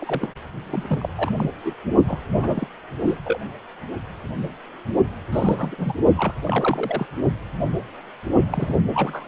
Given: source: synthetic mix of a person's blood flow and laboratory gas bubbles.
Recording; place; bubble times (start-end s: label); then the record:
Doppler ultrasound of blood flow; precordium
0.00-0.32 s: bubbles
0.66-1.09 s: bubbles
1.17-1.30 s: bubbles
1.36-1.50 s: bubbles
1.65-1.74 s: bubbles
2.08-2.19 s: bubbles
2.35-2.68 s: bubbles
3.05-3.19 s: bubbles
3.25-3.39 s: bubbles
5.32-5.75 s: bubbles
5.78-5.92 s: bubbles
6.16-6.33 s: bubbles
6.44-7.07 s: bubbles
8.50-8.75 s: bubbles
8.93-9.28 s: bubbles
From the record:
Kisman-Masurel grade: 232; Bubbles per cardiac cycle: several, 3 to 8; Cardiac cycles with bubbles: 50 to 99%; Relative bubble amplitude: moderate (0.250 to 0.450); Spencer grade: 3 (all of the cardiac periods contain showers or single bubble signals, but not dominating or overriding the cardiac motion signals); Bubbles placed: only in the low amplitude regions of the cardiac cycle